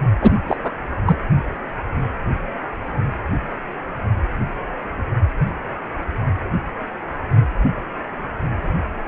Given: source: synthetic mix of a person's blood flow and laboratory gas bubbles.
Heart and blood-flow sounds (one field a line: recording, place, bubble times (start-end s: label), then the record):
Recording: Doppler ultrasound of blood flow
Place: precordium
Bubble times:
0.21-0.35 s: bubbles
0.46-0.56 s: bubbles
0.62-0.72 s: bubbles
1.06-1.16 s: bubbles
From the record:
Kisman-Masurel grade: 213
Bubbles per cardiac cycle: several, 3 to 8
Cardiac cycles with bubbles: 1 to 10%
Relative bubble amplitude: loud (0.450 to 0.775)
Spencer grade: 1 (occasional bubble signal discernible with the cardiac motion signal, with majority of cardiac periods free of bubbles)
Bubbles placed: only in the low amplitude regions of the cardiac cycle